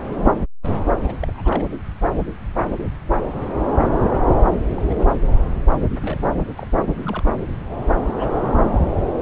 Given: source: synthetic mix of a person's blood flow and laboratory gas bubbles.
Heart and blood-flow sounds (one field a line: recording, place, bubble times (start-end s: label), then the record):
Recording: Doppler ultrasound of blood flow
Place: subclavian vein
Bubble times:
0.00-0.35 s: bubbles
1.03-1.16 s: bubbles
1.22-1.67 s: bubbles
4.75-4.83 s: bubbles
4.85-5.14 s: bubbles
6.01-6.38 s: bubbles
6.57-6.67 s: bubbles
7.03-7.23 s: bubbles
8.04-8.42 s: bubbles
From the record:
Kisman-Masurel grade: 221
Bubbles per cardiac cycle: several, 3 to 8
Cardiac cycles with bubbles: 10 to 50%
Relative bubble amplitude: barely perceptible (0.100 to 0.250)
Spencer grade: 2 (many but less than half of the cardiac periods contain bubble signals, singularly or in groups)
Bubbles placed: anywhere in the cardiac cycle